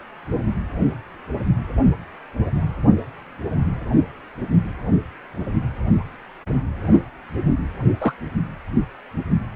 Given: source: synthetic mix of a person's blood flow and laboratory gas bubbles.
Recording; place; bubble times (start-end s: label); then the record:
Doppler ultrasound of blood flow; precordium
8.01-8.14 s: bubbles
From the record:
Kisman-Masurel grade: 122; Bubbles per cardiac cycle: 1 to 2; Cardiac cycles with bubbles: 10 to 50%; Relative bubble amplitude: moderate (0.250 to 0.450); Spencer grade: 2 (many but less than half of the cardiac periods contain bubble signals, singularly or in groups); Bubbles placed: anywhere in the cardiac cycle